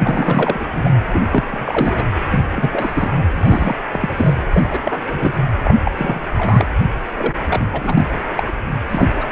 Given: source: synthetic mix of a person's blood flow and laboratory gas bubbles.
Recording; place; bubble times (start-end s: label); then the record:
Doppler ultrasound of blood flow; precordium
0.02-0.93 s: bubbles
1.12-1.22 s: bubbles
1.31-1.43 s: bubbles
1.51-2.05 s: bubbles
2.31-2.40 s: bubbles
2.56-3.27 s: bubbles
3.36-3.78 s: bubbles
3.92-4.33 s: bubbles
4.52-4.62 s: bubbles
4.71-4.80 s: bubbles
4.85-5.02 s: bubbles
5.08-5.32 s: bubbles
5.64-5.73 s: bubbles
5.84-5.92 s: bubbles
5.96-6.19 s: bubbles
6.27-6.67 s: bubbles
7.17-7.34 s: bubbles
7.48-7.69 s: bubbles
7.72-8.05 s: bubbles
8.36-8.43 s: bubbles
8.47-8.52 s: bubbles
8.88-9.10 s: bubbles
9.14-9.27 s: bubbles
From the record:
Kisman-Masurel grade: 342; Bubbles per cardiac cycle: rolling drumbeat, 9 or more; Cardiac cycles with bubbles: 100%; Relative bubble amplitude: moderate (0.250 to 0.450); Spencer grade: 3 (all of the cardiac periods contain showers or single bubble signals, but not dominating or overriding the cardiac motion signals); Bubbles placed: anywhere in the cardiac cycle